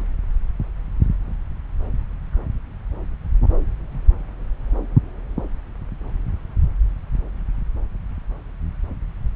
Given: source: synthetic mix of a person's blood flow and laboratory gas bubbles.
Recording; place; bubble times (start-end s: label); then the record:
Doppler ultrasound of blood flow; subclavian vein
no bubbles
From the record:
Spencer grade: 0 (complete lack of bubble signals)